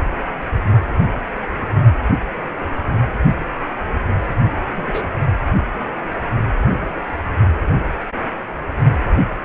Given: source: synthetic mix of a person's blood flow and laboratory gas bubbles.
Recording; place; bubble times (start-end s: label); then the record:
Doppler ultrasound of blood flow; precordium
4.76-5.08 s: bubbles
From the record:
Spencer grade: 1 (occasional bubble signal discernible with the cardiac motion signal, with majority of cardiac periods free of bubbles); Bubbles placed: only in the low amplitude regions of the cardiac cycle